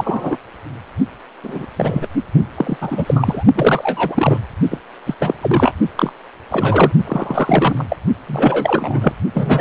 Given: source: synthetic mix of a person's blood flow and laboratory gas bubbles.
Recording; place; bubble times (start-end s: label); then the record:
Doppler ultrasound of blood flow; precordium
0.00-0.37 s: bubbles
1.43-1.66 s: bubbles
1.76-2.08 s: bubbles
2.55-2.77 s: bubbles
2.81-3.43 s: bubbles
3.54-4.40 s: bubbles
4.71-4.78 s: bubbles
5.05-5.15 s: bubbles
5.19-5.34 s: bubbles
5.41-5.72 s: bubbles
5.96-6.12 s: bubbles
6.50-6.92 s: bubbles
7.07-7.85 s: bubbles
7.89-7.96 s: bubbles
8.27-9.12 s: bubbles
9.34-9.61 s: bubbles
From the record:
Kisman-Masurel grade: 243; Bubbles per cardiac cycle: several, 3 to 8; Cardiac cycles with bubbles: 100%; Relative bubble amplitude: loud (0.450 to 0.775); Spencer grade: 3 (all of the cardiac periods contain showers or single bubble signals, but not dominating or overriding the cardiac motion signals); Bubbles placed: only in the low amplitude regions of the cardiac cycle